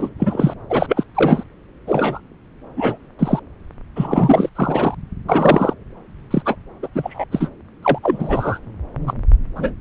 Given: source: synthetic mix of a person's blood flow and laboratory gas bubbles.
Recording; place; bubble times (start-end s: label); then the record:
Doppler ultrasound of blood flow; subclavian vein
0.00-0.09 s: bubbles
0.18-0.54 s: bubbles
0.70-1.03 s: bubbles
1.15-1.43 s: bubbles
1.87-2.21 s: bubbles
2.77-2.98 s: bubbles
3.19-3.40 s: bubbles
3.96-4.50 s: bubbles
4.55-4.95 s: bubbles
5.29-5.74 s: bubbles
6.30-6.42 s: bubbles
6.46-6.55 s: bubbles
6.83-6.88 s: bubbles
6.94-7.25 s: bubbles
7.31-7.49 s: bubbles
7.83-7.98 s: bubbles
8.03-8.59 s: bubbles
9.06-9.14 s: bubbles
9.55-9.74 s: bubbles
From the record:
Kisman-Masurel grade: 233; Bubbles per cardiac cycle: several, 3 to 8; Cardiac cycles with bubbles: 50 to 99%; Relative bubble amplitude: loud (0.450 to 0.775); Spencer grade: 3 (all of the cardiac periods contain showers or single bubble signals, but not dominating or overriding the cardiac motion signals); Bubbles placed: anywhere in the cardiac cycle